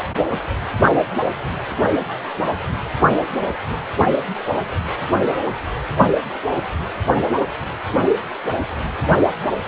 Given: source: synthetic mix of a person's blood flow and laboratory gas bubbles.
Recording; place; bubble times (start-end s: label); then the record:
Doppler ultrasound of blood flow; precordium
no bubbles
From the record:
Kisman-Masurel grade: 000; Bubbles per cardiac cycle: 0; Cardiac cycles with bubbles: 0%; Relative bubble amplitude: no bubbles discernible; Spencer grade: 0 (complete lack of bubble signals)